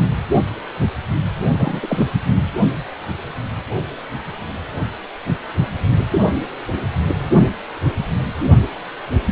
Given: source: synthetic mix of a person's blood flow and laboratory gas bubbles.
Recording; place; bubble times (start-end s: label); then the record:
Doppler ultrasound of blood flow; precordium
1.50-2.11 s: bubbles
From the record:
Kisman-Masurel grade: 222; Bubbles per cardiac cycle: several, 3 to 8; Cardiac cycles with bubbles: 10 to 50%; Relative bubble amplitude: moderate (0.250 to 0.450); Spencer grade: 2 (many but less than half of the cardiac periods contain bubble signals, singularly or in groups); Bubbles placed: anywhere in the cardiac cycle